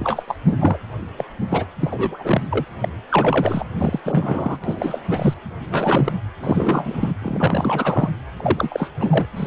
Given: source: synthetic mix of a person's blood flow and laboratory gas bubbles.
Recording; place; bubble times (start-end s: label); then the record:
Doppler ultrasound of blood flow; precordium
0.00-0.23 s: bubbles
0.28-0.34 s: bubbles
0.47-0.78 s: bubbles
1.17-1.25 s: bubbles
1.49-1.65 s: bubbles
1.79-2.40 s: bubbles
2.50-2.65 s: bubbles
2.81-2.88 s: bubbles
3.10-3.65 s: bubbles
3.77-4.00 s: bubbles
4.04-4.58 s: bubbles
4.64-5.00 s: bubbles
5.10-5.34 s: bubbles
5.71-6.12 s: bubbles
6.41-7.13 s: bubbles
7.22-8.10 s: bubbles
8.37-8.90 s: bubbles
8.99-9.25 s: bubbles
9.36-9.47 s: bubbles
From the record:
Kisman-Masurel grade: 342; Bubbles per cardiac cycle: rolling drumbeat, 9 or more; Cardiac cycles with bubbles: 100%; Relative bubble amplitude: moderate (0.250 to 0.450); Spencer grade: 3 (all of the cardiac periods contain showers or single bubble signals, but not dominating or overriding the cardiac motion signals); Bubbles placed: anywhere in the cardiac cycle